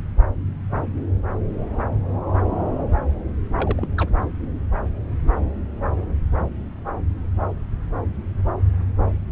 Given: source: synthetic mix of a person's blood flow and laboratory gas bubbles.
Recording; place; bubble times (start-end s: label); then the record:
Doppler ultrasound of blood flow; subclavian vein
3.56-3.88 s: bubbles
3.97-4.09 s: bubbles
From the record:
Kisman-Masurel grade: 221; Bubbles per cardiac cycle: several, 3 to 8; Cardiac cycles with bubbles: 10 to 50%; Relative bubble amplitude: barely perceptible (0.100 to 0.250); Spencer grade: 2 (many but less than half of the cardiac periods contain bubble signals, singularly or in groups); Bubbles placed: anywhere in the cardiac cycle